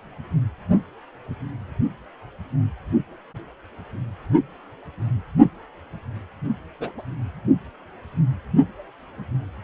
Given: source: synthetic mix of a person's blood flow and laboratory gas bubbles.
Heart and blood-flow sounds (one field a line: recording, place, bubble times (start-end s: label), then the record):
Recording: Doppler ultrasound of blood flow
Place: precordium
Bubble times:
6.80-6.92 s: bubbles
6.98-7.02 s: bubbles
From the record:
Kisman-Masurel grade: 111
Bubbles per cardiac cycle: 1 to 2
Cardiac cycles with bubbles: 1 to 10%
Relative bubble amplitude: barely perceptible (0.100 to 0.250)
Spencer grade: 1 (occasional bubble signal discernible with the cardiac motion signal, with majority of cardiac periods free of bubbles)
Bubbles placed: only in the low amplitude regions of the cardiac cycle